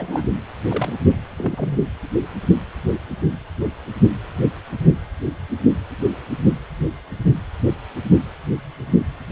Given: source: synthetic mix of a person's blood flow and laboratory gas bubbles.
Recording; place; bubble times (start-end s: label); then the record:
Doppler ultrasound of blood flow; precordium
0.00-0.28 s: bubbles
0.69-0.94 s: bubbles
1.36-1.83 s: bubbles
From the record:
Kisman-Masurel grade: 222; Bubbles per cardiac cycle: several, 3 to 8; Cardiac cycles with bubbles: 10 to 50%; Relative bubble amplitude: moderate (0.250 to 0.450); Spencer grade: 2 (many but less than half of the cardiac periods contain bubble signals, singularly or in groups); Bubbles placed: anywhere in the cardiac cycle